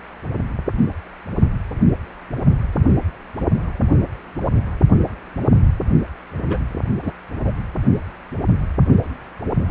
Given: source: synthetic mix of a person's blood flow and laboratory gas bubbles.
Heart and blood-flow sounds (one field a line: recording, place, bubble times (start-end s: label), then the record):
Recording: Doppler ultrasound of blood flow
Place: precordium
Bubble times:
6.49-6.58 s: bubbles
7.03-7.12 s: bubbles
7.44-7.52 s: bubbles
From the record:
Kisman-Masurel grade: 212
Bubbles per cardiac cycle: several, 3 to 8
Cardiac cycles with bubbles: 1 to 10%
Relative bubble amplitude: moderate (0.250 to 0.450)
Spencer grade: 1 (occasional bubble signal discernible with the cardiac motion signal, with majority of cardiac periods free of bubbles)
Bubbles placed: only in the low amplitude regions of the cardiac cycle